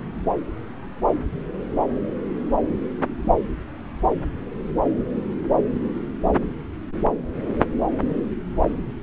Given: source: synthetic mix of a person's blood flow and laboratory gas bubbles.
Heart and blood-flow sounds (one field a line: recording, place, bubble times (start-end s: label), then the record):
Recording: Doppler ultrasound of blood flow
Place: subclavian vein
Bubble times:
no bubbles
From the record:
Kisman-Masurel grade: 000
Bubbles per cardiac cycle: 0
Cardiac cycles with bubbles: 0%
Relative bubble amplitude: no bubbles discernible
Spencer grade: 0 (complete lack of bubble signals)